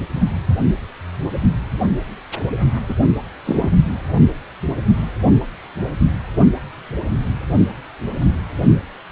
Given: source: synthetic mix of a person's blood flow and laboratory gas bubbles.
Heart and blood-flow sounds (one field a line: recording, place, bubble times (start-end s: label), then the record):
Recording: Doppler ultrasound of blood flow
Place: precordium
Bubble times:
2.89-2.94 s: bubbles
3.44-3.72 s: bubbles
From the record:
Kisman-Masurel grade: 112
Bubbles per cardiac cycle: 1 to 2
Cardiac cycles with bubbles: 1 to 10%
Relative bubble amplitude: moderate (0.250 to 0.450)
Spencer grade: 1 (occasional bubble signal discernible with the cardiac motion signal, with majority of cardiac periods free of bubbles)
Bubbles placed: only in the low amplitude regions of the cardiac cycle